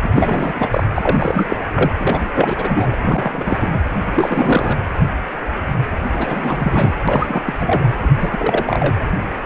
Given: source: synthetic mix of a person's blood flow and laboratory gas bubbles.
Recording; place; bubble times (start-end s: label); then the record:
Doppler ultrasound of blood flow; precordium
0.02-0.11 s: bubbles
0.14-0.84 s: bubbles
0.95-1.56 s: bubbles
1.74-1.91 s: bubbles
2.00-2.28 s: bubbles
2.34-2.96 s: bubbles
3.01-3.68 s: bubbles
3.71-3.80 s: bubbles
4.11-4.76 s: bubbles
6.11-6.94 s: bubbles
7.08-7.42 s: bubbles
7.45-7.54 s: bubbles
7.58-7.87 s: bubbles
8.02-8.09 s: bubbles
8.20-8.97 s: bubbles
From the record:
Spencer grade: 3 (all of the cardiac periods contain showers or single bubble signals, but not dominating or overriding the cardiac motion signals); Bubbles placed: anywhere in the cardiac cycle